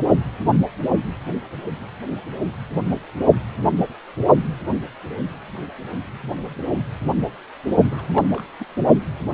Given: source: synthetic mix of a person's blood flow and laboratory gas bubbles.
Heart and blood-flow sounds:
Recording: Doppler ultrasound of blood flow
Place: precordium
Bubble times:
7.90-8.10 s: bubbles
8.12-8.26 s: bubbles
8.30-8.46 s: bubbles
8.60-8.65 s: bubbles
From the record:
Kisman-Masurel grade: 211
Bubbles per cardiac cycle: several, 3 to 8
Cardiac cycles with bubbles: 1 to 10%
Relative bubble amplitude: barely perceptible (0.100 to 0.250)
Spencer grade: 1 (occasional bubble signal discernible with the cardiac motion signal, with majority of cardiac periods free of bubbles)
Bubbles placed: only in the low amplitude regions of the cardiac cycle

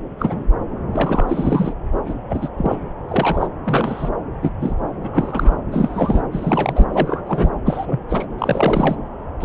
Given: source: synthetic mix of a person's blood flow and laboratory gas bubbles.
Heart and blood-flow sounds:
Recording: Doppler ultrasound of blood flow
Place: subclavian vein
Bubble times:
0.19-0.44 s: bubbles
0.92-1.73 s: bubbles
2.05-2.14 s: bubbles
2.29-2.49 s: bubbles
2.57-2.76 s: bubbles
3.08-3.48 s: bubbles
3.64-4.09 s: bubbles
4.42-4.51 s: bubbles
4.60-4.74 s: bubbles
5.04-5.56 s: bubbles
5.71-6.21 s: bubbles
6.32-6.85 s: bubbles
6.92-7.22 s: bubbles
7.26-7.50 s: bubbles
7.66-8.00 s: bubbles
8.09-8.25 s: bubbles
8.39-8.96 s: bubbles
9.41-9.45 s: bubbles
From the record:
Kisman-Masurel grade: 242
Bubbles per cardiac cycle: several, 3 to 8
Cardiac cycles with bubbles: 100%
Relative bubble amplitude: moderate (0.250 to 0.450)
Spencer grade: 3 (all of the cardiac periods contain showers or single bubble signals, but not dominating or overriding the cardiac motion signals)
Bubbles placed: anywhere in the cardiac cycle

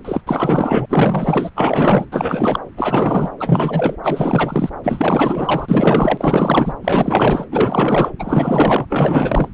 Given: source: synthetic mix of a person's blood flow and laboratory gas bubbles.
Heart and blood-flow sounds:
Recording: Doppler ultrasound of blood flow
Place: subclavian vein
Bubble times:
0.04-0.21 s: bubbles
0.27-0.86 s: bubbles
0.89-1.50 s: bubbles
1.55-2.06 s: bubbles
2.12-2.60 s: bubbles
2.77-3.30 s: bubbles
3.38-3.96 s: bubbles
4.03-4.69 s: bubbles
4.83-6.72 s: bubbles
6.81-7.46 s: bubbles
7.51-8.12 s: bubbles
8.19-8.86 s: bubbles
8.89-9.48 s: bubbles
From the record:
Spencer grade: 4 (maximum detectable bubble signal sounding continuously throughout systole and diastole of every cardiac period, and overriding the amplitude of the normal cardiac signals)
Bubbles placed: anywhere in the cardiac cycle

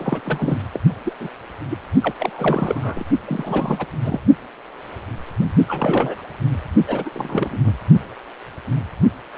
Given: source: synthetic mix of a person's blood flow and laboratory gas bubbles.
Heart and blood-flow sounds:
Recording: Doppler ultrasound of blood flow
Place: precordium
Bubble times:
0.00-0.20 s: bubbles
0.25-0.58 s: bubbles
0.73-0.79 s: bubbles
1.05-1.14 s: bubbles
1.20-1.29 s: bubbles
1.70-1.77 s: bubbles
2.01-2.13 s: bubbles
2.19-3.04 s: bubbles
3.25-3.85 s: bubbles
4.01-4.21 s: bubbles
5.67-6.22 s: bubbles
6.87-7.10 s: bubbles
7.12-7.58 s: bubbles
7.63-7.72 s: bubbles
From the record:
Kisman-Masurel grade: 332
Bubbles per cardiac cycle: rolling drumbeat, 9 or more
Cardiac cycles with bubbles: 50 to 99%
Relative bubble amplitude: moderate (0.250 to 0.450)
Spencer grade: 3 (all of the cardiac periods contain showers or single bubble signals, but not dominating or overriding the cardiac motion signals)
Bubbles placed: only in the low amplitude regions of the cardiac cycle

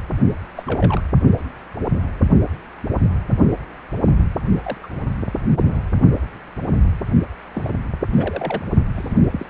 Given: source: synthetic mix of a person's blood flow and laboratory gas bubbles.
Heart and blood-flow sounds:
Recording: Doppler ultrasound of blood flow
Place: precordium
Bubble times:
0.55-0.63 s: bubbles
0.67-1.01 s: bubbles
4.63-4.78 s: bubbles
4.83-4.87 s: bubbles
5.54-5.80 s: bubbles
7.54-7.70 s: bubbles
8.11-8.62 s: bubbles
8.96-9.46 s: bubbles
From the record:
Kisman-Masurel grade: 221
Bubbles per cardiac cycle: several, 3 to 8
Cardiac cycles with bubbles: 10 to 50%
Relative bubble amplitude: barely perceptible (0.100 to 0.250)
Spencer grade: 2 (many but less than half of the cardiac periods contain bubble signals, singularly or in groups)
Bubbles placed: only in the low amplitude regions of the cardiac cycle

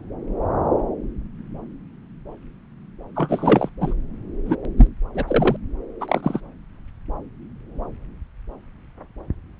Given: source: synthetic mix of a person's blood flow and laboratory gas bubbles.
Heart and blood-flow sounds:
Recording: Doppler ultrasound of blood flow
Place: subclavian vein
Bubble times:
3.15-3.69 s: bubbles
3.80-3.94 s: bubbles
4.46-4.56 s: bubbles
4.78-4.88 s: bubbles
5.14-5.25 s: bubbles
5.27-5.57 s: bubbles
6.01-6.40 s: bubbles
From the record:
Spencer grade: 2 (many but less than half of the cardiac periods contain bubble signals, singularly or in groups)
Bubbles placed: anywhere in the cardiac cycle

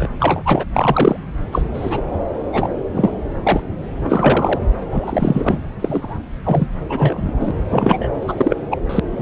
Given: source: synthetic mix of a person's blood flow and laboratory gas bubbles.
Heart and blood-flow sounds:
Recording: Doppler ultrasound of blood flow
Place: subclavian vein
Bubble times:
0.00-0.09 s: bubbles
0.20-0.65 s: bubbles
0.74-1.20 s: bubbles
1.52-1.64 s: bubbles
1.73-2.02 s: bubbles
2.52-2.69 s: bubbles
2.94-3.12 s: bubbles
3.46-3.61 s: bubbles
4.03-4.59 s: bubbles
4.92-5.58 s: bubbles
5.79-6.17 s: bubbles
6.45-6.66 s: bubbles
6.89-7.51 s: bubbles
7.69-8.09 s: bubbles
8.28-8.56 s: bubbles
8.71-8.77 s: bubbles
8.89-8.99 s: bubbles
9.12-9.22 s: bubbles
From the record:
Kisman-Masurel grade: 243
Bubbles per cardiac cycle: several, 3 to 8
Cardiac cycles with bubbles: 100%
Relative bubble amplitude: loud (0.450 to 0.775)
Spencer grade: 3 (all of the cardiac periods contain showers or single bubble signals, but not dominating or overriding the cardiac motion signals)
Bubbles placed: anywhere in the cardiac cycle

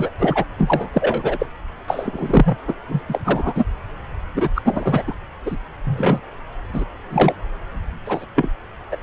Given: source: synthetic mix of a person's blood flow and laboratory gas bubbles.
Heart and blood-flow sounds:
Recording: Doppler ultrasound of blood flow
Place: subclavian vein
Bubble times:
0.00-0.11 s: bubbles
0.19-0.44 s: bubbles
0.58-0.91 s: bubbles
0.94-1.47 s: bubbles
1.88-2.58 s: bubbles
2.67-2.75 s: bubbles
2.88-3.00 s: bubbles
3.08-3.20 s: bubbles
3.25-3.65 s: bubbles
4.34-4.49 s: bubbles
4.55-4.62 s: bubbles
4.64-5.03 s: bubbles
5.07-5.13 s: bubbles
5.46-5.57 s: bubbles
5.84-6.20 s: bubbles
6.73-6.84 s: bubbles
7.09-7.33 s: bubbles
8.05-8.25 s: bubbles
8.35-8.48 s: bubbles
8.91-8.96 s: bubbles
From the record:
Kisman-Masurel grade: 243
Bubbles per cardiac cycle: several, 3 to 8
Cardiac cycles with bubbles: 100%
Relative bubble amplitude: loud (0.450 to 0.775)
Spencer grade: 3 (all of the cardiac periods contain showers or single bubble signals, but not dominating or overriding the cardiac motion signals)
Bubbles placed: anywhere in the cardiac cycle

